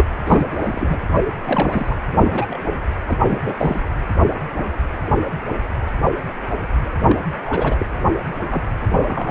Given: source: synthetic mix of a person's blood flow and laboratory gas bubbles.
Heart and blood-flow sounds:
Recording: Doppler ultrasound of blood flow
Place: precordium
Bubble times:
0.00-0.05 s: bubbles
0.26-0.46 s: bubbles
0.52-0.98 s: bubbles
1.44-1.95 s: bubbles
2.11-2.58 s: bubbles
3.08-3.18 s: bubbles
3.21-3.38 s: bubbles
3.44-3.55 s: bubbles
3.58-3.81 s: bubbles
7.09-7.17 s: bubbles
7.46-7.86 s: bubbles
8.51-8.63 s: bubbles
8.96-9.31 s: bubbles
From the record:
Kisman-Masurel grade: 232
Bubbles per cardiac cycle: several, 3 to 8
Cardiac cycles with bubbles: 50 to 99%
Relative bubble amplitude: moderate (0.250 to 0.450)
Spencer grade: 3 (all of the cardiac periods contain showers or single bubble signals, but not dominating or overriding the cardiac motion signals)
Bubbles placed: anywhere in the cardiac cycle

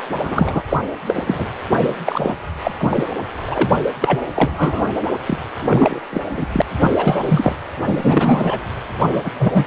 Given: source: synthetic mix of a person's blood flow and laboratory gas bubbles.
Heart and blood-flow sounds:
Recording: Doppler ultrasound of blood flow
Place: precordium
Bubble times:
0.23-0.62 s: bubbles
0.69-0.77 s: bubbles
1.07-1.45 s: bubbles
1.74-1.96 s: bubbles
2.06-2.36 s: bubbles
2.64-2.72 s: bubbles
2.78-3.07 s: bubbles
3.45-3.70 s: bubbles
4.00-4.21 s: bubbles
4.36-4.90 s: bubbles
5.26-5.38 s: bubbles
5.58-6.00 s: bubbles
6.10-6.21 s: bubbles
6.29-6.47 s: bubbles
6.52-6.62 s: bubbles
6.79-7.55 s: bubbles
7.82-8.61 s: bubbles
8.98-9.30 s: bubbles
9.38-9.64 s: bubbles
From the record:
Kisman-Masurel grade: 343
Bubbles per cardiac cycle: rolling drumbeat, 9 or more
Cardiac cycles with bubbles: 100%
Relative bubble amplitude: loud (0.450 to 0.775)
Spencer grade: 3 (all of the cardiac periods contain showers or single bubble signals, but not dominating or overriding the cardiac motion signals)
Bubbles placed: anywhere in the cardiac cycle

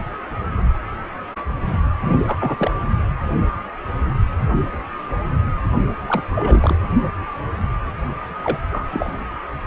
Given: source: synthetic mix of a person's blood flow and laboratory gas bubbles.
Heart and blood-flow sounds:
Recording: Doppler ultrasound of blood flow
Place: precordium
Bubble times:
2.01-2.71 s: bubbles
6.07-6.21 s: bubbles
6.35-6.77 s: bubbles
8.43-8.59 s: bubbles
8.62-9.17 s: bubbles
From the record:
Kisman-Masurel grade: 222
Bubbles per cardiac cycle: several, 3 to 8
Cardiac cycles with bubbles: 10 to 50%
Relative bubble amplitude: moderate (0.250 to 0.450)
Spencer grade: 2 (many but less than half of the cardiac periods contain bubble signals, singularly or in groups)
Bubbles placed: anywhere in the cardiac cycle

